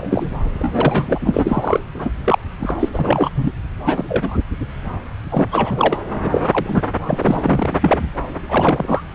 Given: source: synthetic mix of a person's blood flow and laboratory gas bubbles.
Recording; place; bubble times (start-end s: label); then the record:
Doppler ultrasound of blood flow; subclavian vein
0.00-0.38 s: bubbles
0.60-1.80 s: bubbles
1.94-2.11 s: bubbles
2.24-2.38 s: bubbles
2.60-2.75 s: bubbles
2.79-2.88 s: bubbles
2.93-3.30 s: bubbles
3.34-3.51 s: bubbles
3.85-4.04 s: bubbles
4.08-4.38 s: bubbles
5.30-5.44 s: bubbles
5.50-5.97 s: bubbles
6.21-6.83 s: bubbles
7.06-7.76 s: bubbles
7.81-8.07 s: bubbles
8.49-9.02 s: bubbles
From the record:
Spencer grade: 3 (all of the cardiac periods contain showers or single bubble signals, but not dominating or overriding the cardiac motion signals); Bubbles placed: anywhere in the cardiac cycle